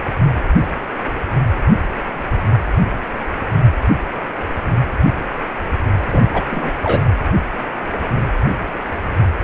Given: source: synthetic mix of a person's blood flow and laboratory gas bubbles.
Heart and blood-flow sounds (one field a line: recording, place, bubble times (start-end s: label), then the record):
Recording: Doppler ultrasound of blood flow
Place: precordium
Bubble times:
6.12-6.23 s: bubbles
6.34-6.44 s: bubbles
6.52-6.73 s: bubbles
6.82-7.00 s: bubbles
From the record:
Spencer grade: 2 (many but less than half of the cardiac periods contain bubble signals, singularly or in groups)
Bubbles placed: anywhere in the cardiac cycle